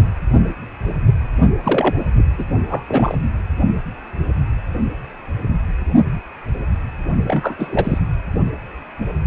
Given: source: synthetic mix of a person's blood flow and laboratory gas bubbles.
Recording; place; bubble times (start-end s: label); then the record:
Doppler ultrasound of blood flow; precordium
1.64-2.00 s: bubbles
2.17-2.23 s: bubbles
2.38-2.44 s: bubbles
2.69-2.83 s: bubbles
2.88-3.17 s: bubbles
7.25-7.98 s: bubbles
From the record:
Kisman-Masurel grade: 232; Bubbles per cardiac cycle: several, 3 to 8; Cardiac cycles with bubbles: 50 to 99%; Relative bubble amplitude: moderate (0.250 to 0.450); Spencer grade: 3 (all of the cardiac periods contain showers or single bubble signals, but not dominating or overriding the cardiac motion signals); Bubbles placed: only in the low amplitude regions of the cardiac cycle